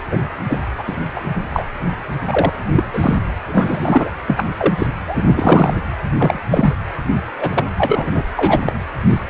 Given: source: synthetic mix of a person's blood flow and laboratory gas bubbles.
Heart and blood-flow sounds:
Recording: Doppler ultrasound of blood flow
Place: precordium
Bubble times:
0.11-0.18 s: bubbles
0.48-0.58 s: bubbles
0.78-0.83 s: bubbles
0.87-0.96 s: bubbles
1.16-1.21 s: bubbles
1.50-1.72 s: bubbles
2.27-2.49 s: bubbles
2.76-2.83 s: bubbles
2.92-3.17 s: bubbles
3.47-4.11 s: bubbles
4.26-4.45 s: bubbles
4.57-4.74 s: bubbles
4.78-4.87 s: bubbles
5.06-5.81 s: bubbles
6.17-6.41 s: bubbles
6.50-6.75 s: bubbles
7.37-7.64 s: bubbles
7.77-8.22 s: bubbles
8.36-8.62 s: bubbles
8.69-8.76 s: bubbles
9.09-9.20 s: bubbles
From the record:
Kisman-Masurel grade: 243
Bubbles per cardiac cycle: several, 3 to 8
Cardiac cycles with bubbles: 100%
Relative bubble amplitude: loud (0.450 to 0.775)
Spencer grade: 3 (all of the cardiac periods contain showers or single bubble signals, but not dominating or overriding the cardiac motion signals)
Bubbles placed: anywhere in the cardiac cycle

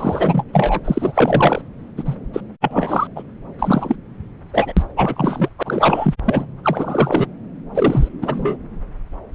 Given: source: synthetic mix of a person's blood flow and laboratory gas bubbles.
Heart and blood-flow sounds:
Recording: Doppler ultrasound of blood flow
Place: subclavian vein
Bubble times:
0.00-0.44 s: bubbles
0.53-0.81 s: bubbles
0.85-1.62 s: bubbles
1.97-2.15 s: bubbles
2.33-2.40 s: bubbles
2.61-3.07 s: bubbles
3.15-3.23 s: bubbles
3.58-3.95 s: bubbles
4.53-4.73 s: bubbles
4.77-4.85 s: bubbles
4.96-5.49 s: bubbles
5.58-6.14 s: bubbles
6.26-6.46 s: bubbles
6.64-7.27 s: bubbles
7.75-8.09 s: bubbles
8.21-8.57 s: bubbles
From the record:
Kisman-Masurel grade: 333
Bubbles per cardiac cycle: rolling drumbeat, 9 or more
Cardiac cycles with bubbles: 50 to 99%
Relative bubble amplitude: loud (0.450 to 0.775)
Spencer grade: 3 (all of the cardiac periods contain showers or single bubble signals, but not dominating or overriding the cardiac motion signals)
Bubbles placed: anywhere in the cardiac cycle

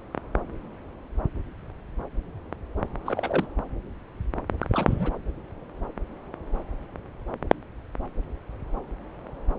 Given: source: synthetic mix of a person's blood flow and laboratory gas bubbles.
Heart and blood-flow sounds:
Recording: Doppler ultrasound of blood flow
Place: subclavian vein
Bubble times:
3.05-3.46 s: bubbles
4.62-5.12 s: bubbles
From the record:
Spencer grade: 1 (occasional bubble signal discernible with the cardiac motion signal, with majority of cardiac periods free of bubbles)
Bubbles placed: anywhere in the cardiac cycle

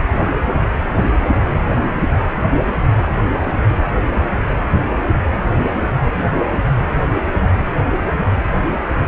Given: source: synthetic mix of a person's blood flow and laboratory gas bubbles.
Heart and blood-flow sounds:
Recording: Doppler ultrasound of blood flow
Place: precordium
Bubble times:
no bubbles
From the record:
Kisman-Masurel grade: 000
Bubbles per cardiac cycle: 0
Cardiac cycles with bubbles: 0%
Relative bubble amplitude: no bubbles discernible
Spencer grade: 0 (complete lack of bubble signals)

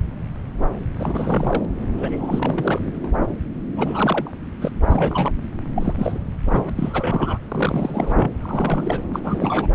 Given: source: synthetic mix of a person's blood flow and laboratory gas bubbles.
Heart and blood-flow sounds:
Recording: Doppler ultrasound of blood flow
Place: subclavian vein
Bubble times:
0.98-1.65 s: bubbles
1.97-3.10 s: bubbles
3.76-4.31 s: bubbles
4.61-4.71 s: bubbles
4.89-5.31 s: bubbles
5.75-5.94 s: bubbles
5.98-6.20 s: bubbles
6.48-6.70 s: bubbles
6.76-7.38 s: bubbles
7.48-8.31 s: bubbles
8.40-9.03 s: bubbles
9.13-9.67 s: bubbles
From the record:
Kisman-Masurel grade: 332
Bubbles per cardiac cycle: rolling drumbeat, 9 or more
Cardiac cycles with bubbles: 50 to 99%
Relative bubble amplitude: moderate (0.250 to 0.450)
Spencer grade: 3 (all of the cardiac periods contain showers or single bubble signals, but not dominating or overriding the cardiac motion signals)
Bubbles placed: anywhere in the cardiac cycle

